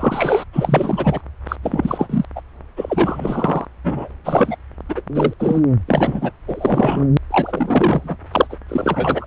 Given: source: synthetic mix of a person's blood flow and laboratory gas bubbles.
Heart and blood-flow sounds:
Doppler ultrasound of blood flow; subclavian vein
0.00-0.44 s: bubbles
0.53-1.21 s: bubbles
1.48-1.56 s: bubbles
1.62-2.25 s: bubbles
2.36-2.41 s: bubbles
2.76-3.65 s: bubbles
3.83-4.11 s: bubbles
4.25-4.57 s: bubbles
4.89-5.02 s: bubbles
5.15-5.33 s: bubbles
5.39-5.61 s: bubbles
5.88-6.32 s: bubbles
6.47-7.07 s: bubbles
7.31-8.17 s: bubbles
8.31-8.56 s: bubbles
8.68-9.26 s: bubbles
From the record:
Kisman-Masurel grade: 333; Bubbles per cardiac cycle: rolling drumbeat, 9 or more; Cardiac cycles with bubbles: 50 to 99%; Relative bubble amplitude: loud (0.450 to 0.775); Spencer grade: 3 (all of the cardiac periods contain showers or single bubble signals, but not dominating or overriding the cardiac motion signals); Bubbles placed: anywhere in the cardiac cycle

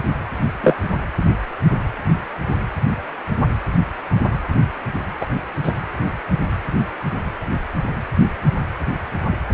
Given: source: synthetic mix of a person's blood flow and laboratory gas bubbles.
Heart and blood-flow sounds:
Doppler ultrasound of blood flow; precordium
0.61-0.75 s: bubbles
5.21-5.26 s: bubbles
5.62-5.72 s: bubbles
From the record:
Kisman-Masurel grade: 123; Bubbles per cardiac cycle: 1 to 2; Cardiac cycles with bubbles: 10 to 50%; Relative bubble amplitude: loud (0.450 to 0.775); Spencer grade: 2 (many but less than half of the cardiac periods contain bubble signals, singularly or in groups); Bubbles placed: anywhere in the cardiac cycle

